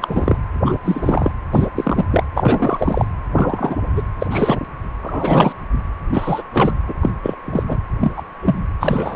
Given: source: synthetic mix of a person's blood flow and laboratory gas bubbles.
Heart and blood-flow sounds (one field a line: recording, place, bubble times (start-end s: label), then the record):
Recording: Doppler ultrasound of blood flow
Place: precordium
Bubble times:
0.00-0.37 s: bubbles
0.65-0.78 s: bubbles
0.84-1.31 s: bubbles
1.52-1.68 s: bubbles
1.76-2.05 s: bubbles
2.11-2.24 s: bubbles
2.34-3.08 s: bubbles
3.35-3.77 s: bubbles
3.96-4.03 s: bubbles
4.21-4.27 s: bubbles
4.30-4.58 s: bubbles
5.03-5.53 s: bubbles
6.07-6.42 s: bubbles
6.53-6.73 s: bubbles
6.87-6.94 s: bubbles
7.01-7.10 s: bubbles
7.23-7.35 s: bubbles
7.46-7.63 s: bubbles
7.66-7.77 s: bubbles
8.00-8.12 s: bubbles
8.16-8.22 s: bubbles
8.42-8.60 s: bubbles
8.80-9.16 s: bubbles
From the record:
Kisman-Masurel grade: 243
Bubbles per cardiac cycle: several, 3 to 8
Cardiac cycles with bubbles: 100%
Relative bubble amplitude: loud (0.450 to 0.775)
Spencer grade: 3 (all of the cardiac periods contain showers or single bubble signals, but not dominating or overriding the cardiac motion signals)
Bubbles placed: anywhere in the cardiac cycle